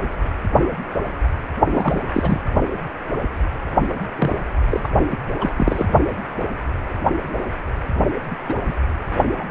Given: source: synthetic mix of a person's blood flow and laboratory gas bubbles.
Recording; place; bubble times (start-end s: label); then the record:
Doppler ultrasound of blood flow; precordium
1.69-2.03 s: bubbles
2.12-2.40 s: bubbles
4.17-4.36 s: bubbles
4.70-4.90 s: bubbles
5.09-5.17 s: bubbles
5.40-5.50 s: bubbles
5.57-5.86 s: bubbles
8.30-8.35 s: bubbles
8.48-8.54 s: bubbles
8.66-8.74 s: bubbles
9.39-9.44 s: bubbles
From the record:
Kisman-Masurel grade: 232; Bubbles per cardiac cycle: several, 3 to 8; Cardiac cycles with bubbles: 50 to 99%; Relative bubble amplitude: moderate (0.250 to 0.450); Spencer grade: 3 (all of the cardiac periods contain showers or single bubble signals, but not dominating or overriding the cardiac motion signals); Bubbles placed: only in the low amplitude regions of the cardiac cycle